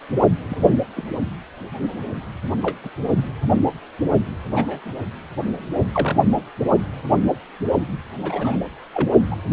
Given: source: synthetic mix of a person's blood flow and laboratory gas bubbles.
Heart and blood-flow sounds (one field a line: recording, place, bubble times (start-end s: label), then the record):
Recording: Doppler ultrasound of blood flow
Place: precordium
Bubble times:
0.49-0.80 s: bubbles
0.96-1.06 s: bubbles
2.62-2.77 s: bubbles
2.83-2.90 s: bubbles
4.54-4.83 s: bubbles
5.93-6.19 s: bubbles
8.21-8.55 s: bubbles
8.94-9.11 s: bubbles
9.30-9.36 s: bubbles
From the record:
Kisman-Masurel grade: 121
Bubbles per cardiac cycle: 1 to 2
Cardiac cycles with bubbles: 10 to 50%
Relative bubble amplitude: barely perceptible (0.100 to 0.250)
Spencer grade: 2 (many but less than half of the cardiac periods contain bubble signals, singularly or in groups)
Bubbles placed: anywhere in the cardiac cycle